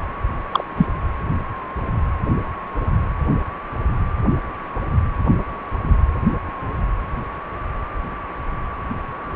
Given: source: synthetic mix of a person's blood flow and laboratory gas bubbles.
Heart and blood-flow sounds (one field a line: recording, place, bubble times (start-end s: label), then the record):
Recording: Doppler ultrasound of blood flow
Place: precordium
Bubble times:
0.51-0.64 s: bubbles
0.76-0.86 s: bubbles
From the record:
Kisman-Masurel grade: 113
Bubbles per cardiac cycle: 1 to 2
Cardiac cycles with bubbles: 1 to 10%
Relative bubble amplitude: loud (0.450 to 0.775)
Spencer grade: 1 (occasional bubble signal discernible with the cardiac motion signal, with majority of cardiac periods free of bubbles)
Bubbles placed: anywhere in the cardiac cycle